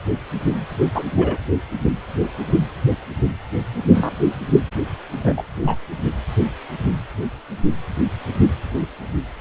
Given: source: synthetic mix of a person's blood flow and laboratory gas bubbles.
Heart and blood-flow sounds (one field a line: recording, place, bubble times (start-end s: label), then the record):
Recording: Doppler ultrasound of blood flow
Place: precordium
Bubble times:
0.94-1.04 s: bubbles
1.16-1.37 s: bubbles
3.94-4.10 s: bubbles
5.14-5.42 s: bubbles
5.62-5.75 s: bubbles
From the record:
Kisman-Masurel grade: 123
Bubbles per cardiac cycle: 1 to 2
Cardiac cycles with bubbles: 10 to 50%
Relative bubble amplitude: loud (0.450 to 0.775)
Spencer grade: 2 (many but less than half of the cardiac periods contain bubble signals, singularly or in groups)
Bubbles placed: anywhere in the cardiac cycle